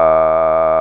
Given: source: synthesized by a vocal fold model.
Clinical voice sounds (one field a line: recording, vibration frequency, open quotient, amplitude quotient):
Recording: sustained vowel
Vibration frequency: 80 Hz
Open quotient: 0.1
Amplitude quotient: 1.3